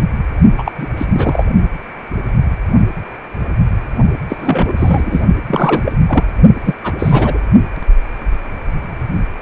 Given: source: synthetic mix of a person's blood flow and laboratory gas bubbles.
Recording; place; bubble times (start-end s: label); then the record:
Doppler ultrasound of blood flow; precordium
0.58-0.72 s: bubbles
0.78-0.86 s: bubbles
0.97-1.05 s: bubbles
1.09-1.46 s: bubbles
4.29-4.73 s: bubbles
4.77-5.25 s: bubbles
5.46-5.92 s: bubbles
6.07-6.24 s: bubbles
6.64-6.75 s: bubbles
6.83-6.93 s: bubbles
6.99-7.38 s: bubbles
From the record:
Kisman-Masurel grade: 333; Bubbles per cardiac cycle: rolling drumbeat, 9 or more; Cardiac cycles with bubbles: 50 to 99%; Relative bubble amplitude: loud (0.450 to 0.775); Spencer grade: 3 (all of the cardiac periods contain showers or single bubble signals, but not dominating or overriding the cardiac motion signals); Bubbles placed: only in the low amplitude regions of the cardiac cycle